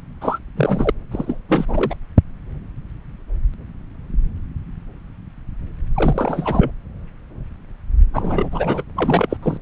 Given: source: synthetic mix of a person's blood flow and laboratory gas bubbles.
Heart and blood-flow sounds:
Doppler ultrasound of blood flow; subclavian vein
0.21-0.39 s: bubbles
0.56-0.91 s: bubbles
1.11-1.38 s: bubbles
1.48-1.96 s: bubbles
5.95-6.71 s: bubbles
8.13-8.83 s: bubbles
8.96-9.37 s: bubbles
9.42-9.57 s: bubbles
From the record:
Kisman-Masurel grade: 332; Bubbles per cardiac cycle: rolling drumbeat, 9 or more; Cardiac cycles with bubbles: 50 to 99%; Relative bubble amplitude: moderate (0.250 to 0.450); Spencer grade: 3 (all of the cardiac periods contain showers or single bubble signals, but not dominating or overriding the cardiac motion signals); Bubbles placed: anywhere in the cardiac cycle

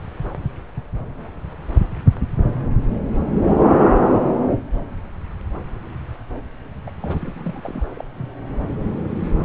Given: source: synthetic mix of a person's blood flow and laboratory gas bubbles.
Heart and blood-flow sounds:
Doppler ultrasound of blood flow; subclavian vein
6.87-6.92 s: bubbles
7.02-7.83 s: bubbles
7.95-8.04 s: bubbles
8.18-8.29 s: bubbles
From the record:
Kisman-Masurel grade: 211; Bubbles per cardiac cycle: several, 3 to 8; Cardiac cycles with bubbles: 1 to 10%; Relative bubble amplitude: barely perceptible (0.100 to 0.250); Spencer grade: 1 (occasional bubble signal discernible with the cardiac motion signal, with majority of cardiac periods free of bubbles); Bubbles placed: anywhere in the cardiac cycle

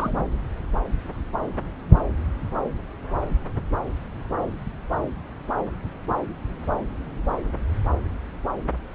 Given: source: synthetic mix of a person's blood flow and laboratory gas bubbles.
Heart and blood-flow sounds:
Doppler ultrasound of blood flow; subclavian vein
0.00-0.24 s: bubbles
From the record:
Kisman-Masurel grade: 212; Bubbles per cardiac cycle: several, 3 to 8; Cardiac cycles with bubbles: 1 to 10%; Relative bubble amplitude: moderate (0.250 to 0.450); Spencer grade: 1 (occasional bubble signal discernible with the cardiac motion signal, with majority of cardiac periods free of bubbles); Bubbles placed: anywhere in the cardiac cycle

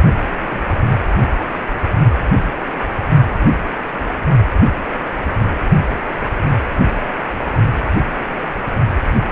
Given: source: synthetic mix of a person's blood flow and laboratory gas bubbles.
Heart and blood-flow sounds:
Doppler ultrasound of blood flow; precordium
0.30-0.35 s: bubbles
0.37-0.61 s: bubbles
From the record:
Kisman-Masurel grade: 111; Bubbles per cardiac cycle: 1 to 2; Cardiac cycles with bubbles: 1 to 10%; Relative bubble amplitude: barely perceptible (0.100 to 0.250); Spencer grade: 1 (occasional bubble signal discernible with the cardiac motion signal, with majority of cardiac periods free of bubbles); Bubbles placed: only in the low amplitude regions of the cardiac cycle

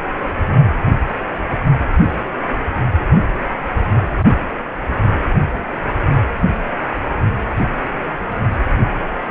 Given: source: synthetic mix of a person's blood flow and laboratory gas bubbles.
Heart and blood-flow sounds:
Doppler ultrasound of blood flow; precordium
no bubbles
From the record:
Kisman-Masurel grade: 000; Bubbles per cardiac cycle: 0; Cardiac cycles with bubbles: 0%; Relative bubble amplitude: no bubbles discernible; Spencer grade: 0 (complete lack of bubble signals)

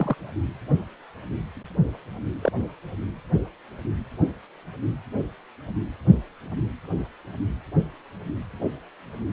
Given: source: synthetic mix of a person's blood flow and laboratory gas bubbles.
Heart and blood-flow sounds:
Doppler ultrasound of blood flow; precordium
0.00-0.14 s: bubbles
2.42-2.52 s: bubbles
From the record:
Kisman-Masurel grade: 122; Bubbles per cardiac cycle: 1 to 2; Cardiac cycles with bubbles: 10 to 50%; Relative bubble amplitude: moderate (0.250 to 0.450); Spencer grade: 2 (many but less than half of the cardiac periods contain bubble signals, singularly or in groups); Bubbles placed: anywhere in the cardiac cycle

